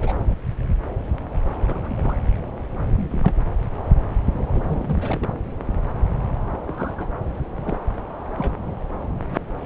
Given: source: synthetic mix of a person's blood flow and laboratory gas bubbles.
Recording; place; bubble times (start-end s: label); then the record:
Doppler ultrasound of blood flow; subclavian vein
0.00-0.16 s: bubbles
1.66-2.17 s: bubbles
2.88-3.34 s: bubbles
4.47-4.62 s: bubbles
4.67-5.33 s: bubbles
6.67-7.08 s: bubbles
7.64-7.77 s: bubbles
8.37-8.55 s: bubbles
From the record:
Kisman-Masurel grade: 221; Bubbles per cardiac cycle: several, 3 to 8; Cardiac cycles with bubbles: 10 to 50%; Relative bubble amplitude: barely perceptible (0.100 to 0.250); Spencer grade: 2 (many but less than half of the cardiac periods contain bubble signals, singularly or in groups); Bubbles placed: anywhere in the cardiac cycle